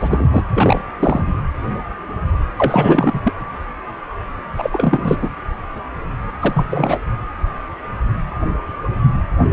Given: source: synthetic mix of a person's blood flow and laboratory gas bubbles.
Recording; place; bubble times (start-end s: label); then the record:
Doppler ultrasound of blood flow; precordium
0.00-0.44 s: bubbles
0.54-0.82 s: bubbles
0.99-1.25 s: bubbles
2.58-3.33 s: bubbles
4.57-5.17 s: bubbles
5.21-5.30 s: bubbles
6.39-7.13 s: bubbles
From the record:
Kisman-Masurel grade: 333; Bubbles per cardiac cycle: rolling drumbeat, 9 or more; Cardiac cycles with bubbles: 50 to 99%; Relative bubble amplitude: loud (0.450 to 0.775); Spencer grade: 3 (all of the cardiac periods contain showers or single bubble signals, but not dominating or overriding the cardiac motion signals); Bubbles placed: anywhere in the cardiac cycle